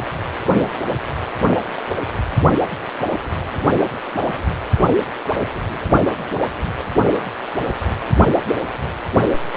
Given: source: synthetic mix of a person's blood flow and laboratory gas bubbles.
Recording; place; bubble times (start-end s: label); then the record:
Doppler ultrasound of blood flow; precordium
no bubbles
From the record:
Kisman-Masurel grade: 000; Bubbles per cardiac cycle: 0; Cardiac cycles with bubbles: 0%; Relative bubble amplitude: no bubbles discernible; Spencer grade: 0 (complete lack of bubble signals)